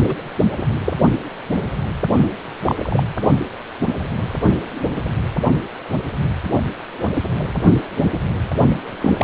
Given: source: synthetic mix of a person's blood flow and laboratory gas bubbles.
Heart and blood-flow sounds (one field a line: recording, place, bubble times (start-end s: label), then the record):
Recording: Doppler ultrasound of blood flow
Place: precordium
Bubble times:
0.04-0.15 s: bubbles
0.57-0.63 s: bubbles
0.84-0.93 s: bubbles
2.65-3.06 s: bubbles
6.56-6.62 s: bubbles
9.00-9.24 s: bubbles
From the record:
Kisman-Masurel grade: 122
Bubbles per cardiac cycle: 1 to 2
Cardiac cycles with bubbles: 10 to 50%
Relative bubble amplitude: moderate (0.250 to 0.450)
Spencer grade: 2 (many but less than half of the cardiac periods contain bubble signals, singularly or in groups)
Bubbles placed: anywhere in the cardiac cycle